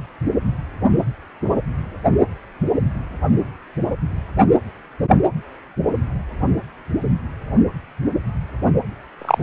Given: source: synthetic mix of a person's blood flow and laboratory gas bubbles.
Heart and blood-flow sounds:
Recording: Doppler ultrasound of blood flow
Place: precordium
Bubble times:
9.19-9.43 s: bubbles
From the record:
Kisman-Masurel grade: 123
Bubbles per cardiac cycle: 1 to 2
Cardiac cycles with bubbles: 10 to 50%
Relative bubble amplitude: loud (0.450 to 0.775)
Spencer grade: 2 (many but less than half of the cardiac periods contain bubble signals, singularly or in groups)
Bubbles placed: anywhere in the cardiac cycle

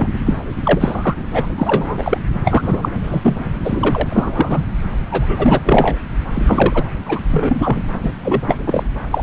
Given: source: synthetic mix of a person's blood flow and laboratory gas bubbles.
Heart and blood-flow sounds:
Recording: Doppler ultrasound of blood flow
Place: subclavian vein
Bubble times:
0.00-0.08 s: bubbles
0.26-0.36 s: bubbles
0.65-1.16 s: bubbles
1.35-1.46 s: bubbles
1.57-2.18 s: bubbles
2.44-2.89 s: bubbles
3.02-3.36 s: bubbles
3.64-4.65 s: bubbles
5.10-5.60 s: bubbles
5.64-5.96 s: bubbles
6.35-6.83 s: bubbles
7.05-7.20 s: bubbles
7.31-7.83 s: bubbles
8.04-8.11 s: bubbles
8.24-8.42 s: bubbles
8.46-8.58 s: bubbles
8.67-8.84 s: bubbles
9.11-9.23 s: bubbles
From the record:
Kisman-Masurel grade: 343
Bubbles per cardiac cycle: rolling drumbeat, 9 or more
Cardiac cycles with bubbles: 100%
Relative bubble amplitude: loud (0.450 to 0.775)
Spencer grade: 3 (all of the cardiac periods contain showers or single bubble signals, but not dominating or overriding the cardiac motion signals)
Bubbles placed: anywhere in the cardiac cycle

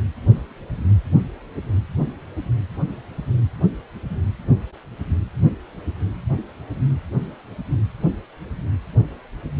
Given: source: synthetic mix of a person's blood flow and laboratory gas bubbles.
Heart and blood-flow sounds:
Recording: Doppler ultrasound of blood flow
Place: precordium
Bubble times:
no bubbles
From the record:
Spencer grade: 0 (complete lack of bubble signals)

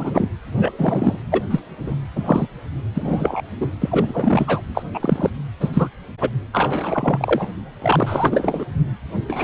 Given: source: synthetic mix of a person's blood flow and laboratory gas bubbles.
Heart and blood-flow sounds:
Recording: Doppler ultrasound of blood flow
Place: precordium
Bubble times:
0.00-0.29 s: bubbles
0.56-1.17 s: bubbles
1.31-1.42 s: bubbles
1.50-1.60 s: bubbles
1.81-1.95 s: bubbles
2.15-2.47 s: bubbles
2.94-3.42 s: bubbles
3.60-3.71 s: bubbles
3.80-4.61 s: bubbles
4.74-4.83 s: bubbles
4.94-5.30 s: bubbles
5.60-5.70 s: bubbles
5.73-5.88 s: bubbles
6.21-6.29 s: bubbles
6.53-7.48 s: bubbles
7.82-8.65 s: bubbles
9.29-9.44 s: bubbles
From the record:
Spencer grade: 3 (all of the cardiac periods contain showers or single bubble signals, but not dominating or overriding the cardiac motion signals)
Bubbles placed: anywhere in the cardiac cycle

